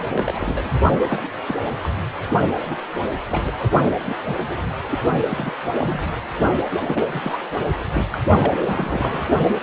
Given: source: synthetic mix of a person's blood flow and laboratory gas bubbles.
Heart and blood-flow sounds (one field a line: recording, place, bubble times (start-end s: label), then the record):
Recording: Doppler ultrasound of blood flow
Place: precordium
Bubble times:
0.10-0.70 s: bubbles
0.99-1.21 s: bubbles
1.48-1.54 s: bubbles
1.81-1.89 s: bubbles
2.69-2.76 s: bubbles
3.31-3.70 s: bubbles
4.02-4.17 s: bubbles
4.27-4.34 s: bubbles
4.49-4.61 s: bubbles
4.88-5.02 s: bubbles
5.29-5.53 s: bubbles
5.79-6.08 s: bubbles
6.86-7.06 s: bubbles
7.10-7.38 s: bubbles
7.73-8.20 s: bubbles
8.39-9.24 s: bubbles
From the record:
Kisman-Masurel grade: 242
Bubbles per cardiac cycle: several, 3 to 8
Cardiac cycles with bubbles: 100%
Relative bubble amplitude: moderate (0.250 to 0.450)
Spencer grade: 3 (all of the cardiac periods contain showers or single bubble signals, but not dominating or overriding the cardiac motion signals)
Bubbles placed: only in the low amplitude regions of the cardiac cycle